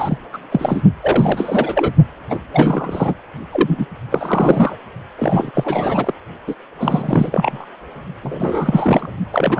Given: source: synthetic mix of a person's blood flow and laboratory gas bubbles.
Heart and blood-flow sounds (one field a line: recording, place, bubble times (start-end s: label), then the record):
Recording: Doppler ultrasound of blood flow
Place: precordium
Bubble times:
0.00-0.18 s: bubbles
0.33-0.38 s: bubbles
0.51-0.82 s: bubbles
1.01-1.94 s: bubbles
2.29-2.40 s: bubbles
2.52-3.14 s: bubbles
3.52-3.86 s: bubbles
4.10-4.75 s: bubbles
5.18-5.51 s: bubbles
5.54-6.14 s: bubbles
6.46-6.55 s: bubbles
6.77-7.66 s: bubbles
8.23-9.08 s: bubbles
9.33-9.60 s: bubbles
From the record:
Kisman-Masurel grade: 343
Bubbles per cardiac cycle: rolling drumbeat, 9 or more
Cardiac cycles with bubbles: 100%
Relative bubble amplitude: loud (0.450 to 0.775)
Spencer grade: 3 (all of the cardiac periods contain showers or single bubble signals, but not dominating or overriding the cardiac motion signals)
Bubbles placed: only in the low amplitude regions of the cardiac cycle